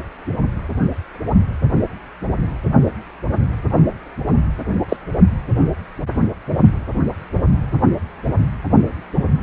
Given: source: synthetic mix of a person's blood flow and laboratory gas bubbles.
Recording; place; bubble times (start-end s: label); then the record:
Doppler ultrasound of blood flow; precordium
4.89-4.96 s: bubbles
From the record:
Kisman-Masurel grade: 113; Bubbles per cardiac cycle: 1 to 2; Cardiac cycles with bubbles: 1 to 10%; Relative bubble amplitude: loud (0.450 to 0.775); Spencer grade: 1 (occasional bubble signal discernible with the cardiac motion signal, with majority of cardiac periods free of bubbles); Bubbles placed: anywhere in the cardiac cycle